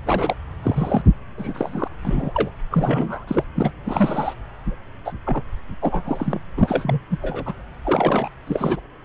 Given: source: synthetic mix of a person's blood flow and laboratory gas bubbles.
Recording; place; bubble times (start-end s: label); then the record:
Doppler ultrasound of blood flow; subclavian vein
0.06-0.35 s: bubbles
0.62-1.02 s: bubbles
1.38-1.88 s: bubbles
2.04-2.50 s: bubbles
2.71-3.44 s: bubbles
3.55-3.71 s: bubbles
3.84-4.34 s: bubbles
4.66-4.75 s: bubbles
5.04-5.12 s: bubbles
5.25-5.42 s: bubbles
5.82-6.40 s: bubbles
6.57-7.00 s: bubbles
7.11-7.17 s: bubbles
7.22-7.55 s: bubbles
7.84-8.29 s: bubbles
8.46-8.80 s: bubbles
From the record:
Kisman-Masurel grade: 232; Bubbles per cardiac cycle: several, 3 to 8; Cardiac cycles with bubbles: 50 to 99%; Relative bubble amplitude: moderate (0.250 to 0.450); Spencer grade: 3 (all of the cardiac periods contain showers or single bubble signals, but not dominating or overriding the cardiac motion signals); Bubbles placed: anywhere in the cardiac cycle